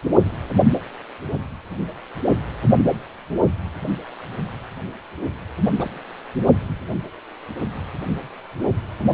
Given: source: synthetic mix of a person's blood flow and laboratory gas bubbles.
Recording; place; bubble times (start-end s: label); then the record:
Doppler ultrasound of blood flow; precordium
5.78-5.91 s: bubbles
From the record:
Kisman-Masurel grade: 111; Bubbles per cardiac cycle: 1 to 2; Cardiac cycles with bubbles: 1 to 10%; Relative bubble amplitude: barely perceptible (0.100 to 0.250); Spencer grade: 1 (occasional bubble signal discernible with the cardiac motion signal, with majority of cardiac periods free of bubbles); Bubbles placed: anywhere in the cardiac cycle